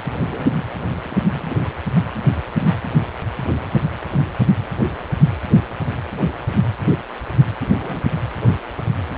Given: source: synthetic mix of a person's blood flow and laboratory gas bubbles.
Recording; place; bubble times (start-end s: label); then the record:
Doppler ultrasound of blood flow; precordium
0.16-0.64 s: bubbles
1.03-1.18 s: bubbles
1.40-1.69 s: bubbles
7.61-7.67 s: bubbles
7.76-8.05 s: bubbles
From the record:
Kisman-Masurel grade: 221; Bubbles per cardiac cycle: several, 3 to 8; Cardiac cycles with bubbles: 10 to 50%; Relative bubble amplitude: barely perceptible (0.100 to 0.250); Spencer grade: 2 (many but less than half of the cardiac periods contain bubble signals, singularly or in groups); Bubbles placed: anywhere in the cardiac cycle